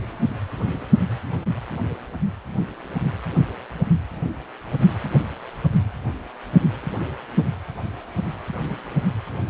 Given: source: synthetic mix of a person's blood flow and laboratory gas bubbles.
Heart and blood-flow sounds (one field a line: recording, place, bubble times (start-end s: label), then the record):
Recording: Doppler ultrasound of blood flow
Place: precordium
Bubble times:
no bubbles
From the record:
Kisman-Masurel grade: 000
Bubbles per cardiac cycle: 0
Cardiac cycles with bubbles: 0%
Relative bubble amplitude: no bubbles discernible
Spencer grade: 0 (complete lack of bubble signals)